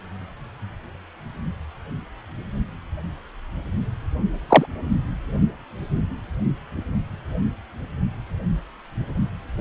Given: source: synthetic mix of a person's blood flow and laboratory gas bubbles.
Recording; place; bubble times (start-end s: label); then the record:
Doppler ultrasound of blood flow; precordium
4.49-4.66 s: bubbles
From the record:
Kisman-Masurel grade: 123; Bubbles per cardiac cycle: 1 to 2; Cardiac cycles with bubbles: 10 to 50%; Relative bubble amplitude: loud (0.450 to 0.775); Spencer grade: 2 (many but less than half of the cardiac periods contain bubble signals, singularly or in groups); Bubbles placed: only in the low amplitude regions of the cardiac cycle